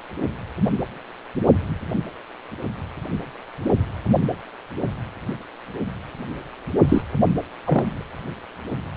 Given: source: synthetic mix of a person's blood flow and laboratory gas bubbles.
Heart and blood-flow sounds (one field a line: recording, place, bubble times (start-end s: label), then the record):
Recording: Doppler ultrasound of blood flow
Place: precordium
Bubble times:
6.88-7.02 s: bubbles
7.63-8.05 s: bubbles
From the record:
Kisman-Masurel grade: 113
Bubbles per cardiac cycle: 1 to 2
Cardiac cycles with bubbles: 1 to 10%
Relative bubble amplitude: loud (0.450 to 0.775)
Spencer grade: 1 (occasional bubble signal discernible with the cardiac motion signal, with majority of cardiac periods free of bubbles)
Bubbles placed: only in the low amplitude regions of the cardiac cycle